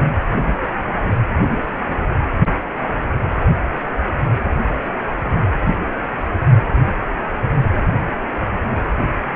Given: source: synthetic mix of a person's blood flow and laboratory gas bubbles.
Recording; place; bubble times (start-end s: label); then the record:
Doppler ultrasound of blood flow; precordium
7.52-7.65 s: bubbles
From the record:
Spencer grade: 1 (occasional bubble signal discernible with the cardiac motion signal, with majority of cardiac periods free of bubbles); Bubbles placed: anywhere in the cardiac cycle